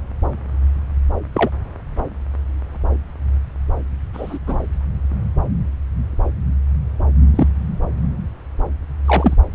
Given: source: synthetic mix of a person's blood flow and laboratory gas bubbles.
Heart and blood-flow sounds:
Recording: Doppler ultrasound of blood flow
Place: subclavian vein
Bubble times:
1.34-1.50 s: bubbles
4.13-4.38 s: bubbles
4.46-4.58 s: bubbles
7.35-7.47 s: bubbles
9.05-9.35 s: bubbles
From the record:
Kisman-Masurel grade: 123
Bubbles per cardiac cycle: 1 to 2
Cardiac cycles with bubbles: 10 to 50%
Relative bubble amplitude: loud (0.450 to 0.775)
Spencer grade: 2 (many but less than half of the cardiac periods contain bubble signals, singularly or in groups)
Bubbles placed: anywhere in the cardiac cycle

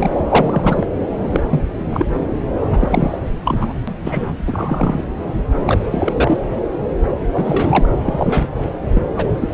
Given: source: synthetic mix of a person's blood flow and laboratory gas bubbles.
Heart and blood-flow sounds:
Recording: Doppler ultrasound of blood flow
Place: subclavian vein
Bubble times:
0.00-0.18 s: bubbles
0.29-0.86 s: bubbles
1.22-1.43 s: bubbles
1.49-1.60 s: bubbles
1.91-2.06 s: bubbles
2.71-3.19 s: bubbles
3.45-3.73 s: bubbles
3.87-3.93 s: bubbles
4.03-4.33 s: bubbles
4.46-5.04 s: bubbles
5.64-5.79 s: bubbles
5.91-6.12 s: bubbles
6.15-6.38 s: bubbles
7.33-7.87 s: bubbles
8.05-8.48 s: bubbles
8.94-9.02 s: bubbles
9.15-9.36 s: bubbles
9.40-9.49 s: bubbles
From the record:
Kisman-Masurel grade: 233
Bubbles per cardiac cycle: several, 3 to 8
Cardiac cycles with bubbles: 50 to 99%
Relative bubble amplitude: loud (0.450 to 0.775)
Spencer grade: 3 (all of the cardiac periods contain showers or single bubble signals, but not dominating or overriding the cardiac motion signals)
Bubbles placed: anywhere in the cardiac cycle

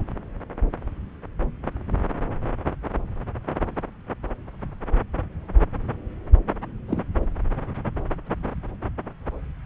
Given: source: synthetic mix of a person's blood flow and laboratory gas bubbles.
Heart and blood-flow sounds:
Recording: Doppler ultrasound of blood flow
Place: subclavian vein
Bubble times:
6.88-7.03 s: bubbles
From the record:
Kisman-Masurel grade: 111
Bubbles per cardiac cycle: 1 to 2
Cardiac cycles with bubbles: 1 to 10%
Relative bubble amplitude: barely perceptible (0.100 to 0.250)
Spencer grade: 1 (occasional bubble signal discernible with the cardiac motion signal, with majority of cardiac periods free of bubbles)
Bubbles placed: anywhere in the cardiac cycle

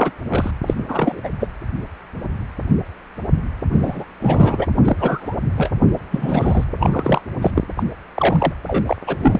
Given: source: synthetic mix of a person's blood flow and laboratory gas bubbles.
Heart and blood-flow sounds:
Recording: Doppler ultrasound of blood flow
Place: precordium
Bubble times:
0.00-0.12 s: bubbles
0.30-0.51 s: bubbles
0.67-0.74 s: bubbles
0.89-1.21 s: bubbles
1.24-1.30 s: bubbles
1.40-1.47 s: bubbles
3.73-4.05 s: bubbles
4.19-4.67 s: bubbles
4.83-5.36 s: bubbles
5.56-5.70 s: bubbles
6.11-6.64 s: bubbles
6.80-7.21 s: bubbles
7.42-7.51 s: bubbles
7.55-7.62 s: bubbles
7.76-7.83 s: bubbles
8.15-8.53 s: bubbles
8.67-8.96 s: bubbles
9.07-9.16 s: bubbles
9.18-9.40 s: bubbles
From the record:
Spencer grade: 3 (all of the cardiac periods contain showers or single bubble signals, but not dominating or overriding the cardiac motion signals)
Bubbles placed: anywhere in the cardiac cycle

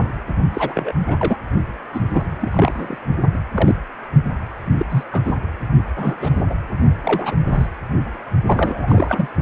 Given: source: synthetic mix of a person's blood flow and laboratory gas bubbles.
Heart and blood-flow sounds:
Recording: Doppler ultrasound of blood flow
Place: precordium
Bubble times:
0.00-0.09 s: bubbles
0.54-0.92 s: bubbles
1.04-1.37 s: bubbles
1.94-2.26 s: bubbles
2.40-2.98 s: bubbles
3.33-3.38 s: bubbles
3.54-3.75 s: bubbles
4.78-4.86 s: bubbles
4.90-5.04 s: bubbles
5.12-5.22 s: bubbles
5.25-5.34 s: bubbles
5.96-6.44 s: bubbles
6.49-6.58 s: bubbles
7.03-7.36 s: bubbles
7.46-7.67 s: bubbles
8.45-9.28 s: bubbles
From the record:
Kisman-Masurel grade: 242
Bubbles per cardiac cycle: several, 3 to 8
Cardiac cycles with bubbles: 100%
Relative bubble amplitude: moderate (0.250 to 0.450)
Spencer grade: 3 (all of the cardiac periods contain showers or single bubble signals, but not dominating or overriding the cardiac motion signals)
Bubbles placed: only in the low amplitude regions of the cardiac cycle

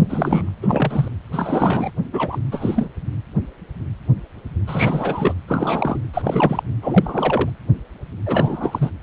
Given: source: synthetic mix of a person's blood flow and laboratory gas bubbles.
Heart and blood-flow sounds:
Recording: Doppler ultrasound of blood flow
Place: precordium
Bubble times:
0.09-0.53 s: bubbles
0.62-1.08 s: bubbles
1.32-1.91 s: bubbles
2.12-2.39 s: bubbles
2.51-2.88 s: bubbles
4.67-5.34 s: bubbles
5.47-5.99 s: bubbles
6.13-6.22 s: bubbles
6.25-6.63 s: bubbles
6.81-7.50 s: bubbles
8.25-8.90 s: bubbles
From the record:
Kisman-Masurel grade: 333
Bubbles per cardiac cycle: rolling drumbeat, 9 or more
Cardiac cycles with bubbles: 50 to 99%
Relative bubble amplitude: loud (0.450 to 0.775)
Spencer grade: 3 (all of the cardiac periods contain showers or single bubble signals, but not dominating or overriding the cardiac motion signals)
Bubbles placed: anywhere in the cardiac cycle

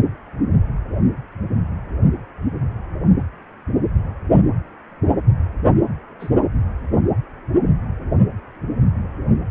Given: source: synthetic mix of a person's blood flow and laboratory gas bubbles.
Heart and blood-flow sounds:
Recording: Doppler ultrasound of blood flow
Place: precordium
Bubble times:
6.20-6.30 s: bubbles
From the record:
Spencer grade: 1 (occasional bubble signal discernible with the cardiac motion signal, with majority of cardiac periods free of bubbles)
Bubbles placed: anywhere in the cardiac cycle

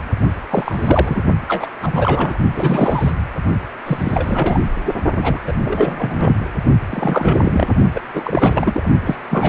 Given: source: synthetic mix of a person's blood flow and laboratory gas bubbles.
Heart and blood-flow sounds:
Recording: Doppler ultrasound of blood flow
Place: precordium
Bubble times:
0.50-1.23 s: bubbles
1.48-1.70 s: bubbles
1.82-2.37 s: bubbles
2.54-3.17 s: bubbles
3.86-4.63 s: bubbles
4.84-4.94 s: bubbles
5.17-5.39 s: bubbles
5.47-5.52 s: bubbles
5.64-6.47 s: bubbles
6.90-7.74 s: bubbles
7.94-8.01 s: bubbles
8.13-8.87 s: bubbles
9.04-9.15 s: bubbles
9.30-9.49 s: bubbles
From the record:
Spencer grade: 3 (all of the cardiac periods contain showers or single bubble signals, but not dominating or overriding the cardiac motion signals)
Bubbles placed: only in the low amplitude regions of the cardiac cycle

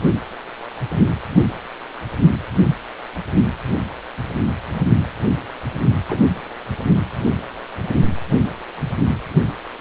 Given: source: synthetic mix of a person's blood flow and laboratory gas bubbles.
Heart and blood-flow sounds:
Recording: Doppler ultrasound of blood flow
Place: precordium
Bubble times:
6.08-6.20 s: bubbles
From the record:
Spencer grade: 1 (occasional bubble signal discernible with the cardiac motion signal, with majority of cardiac periods free of bubbles)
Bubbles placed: anywhere in the cardiac cycle

